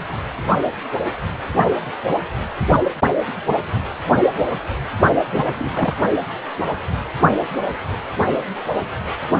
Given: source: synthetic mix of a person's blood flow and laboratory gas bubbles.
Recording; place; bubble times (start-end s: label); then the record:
Doppler ultrasound of blood flow; precordium
5.33-5.72 s: bubbles
5.75-5.94 s: bubbles
From the record:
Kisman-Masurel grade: 212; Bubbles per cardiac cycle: several, 3 to 8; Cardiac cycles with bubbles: 1 to 10%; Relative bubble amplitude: moderate (0.250 to 0.450); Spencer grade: 1 (occasional bubble signal discernible with the cardiac motion signal, with majority of cardiac periods free of bubbles); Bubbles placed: only in the low amplitude regions of the cardiac cycle